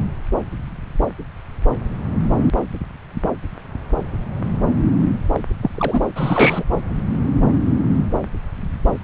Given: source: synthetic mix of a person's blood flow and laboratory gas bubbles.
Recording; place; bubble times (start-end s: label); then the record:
Doppler ultrasound of blood flow; subclavian vein
5.33-5.40 s: bubbles
5.62-5.71 s: bubbles
5.75-6.00 s: bubbles
6.16-6.64 s: bubbles
From the record:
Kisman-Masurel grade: 222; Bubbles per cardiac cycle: several, 3 to 8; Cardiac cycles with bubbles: 10 to 50%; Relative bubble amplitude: moderate (0.250 to 0.450); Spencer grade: 2 (many but less than half of the cardiac periods contain bubble signals, singularly or in groups); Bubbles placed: anywhere in the cardiac cycle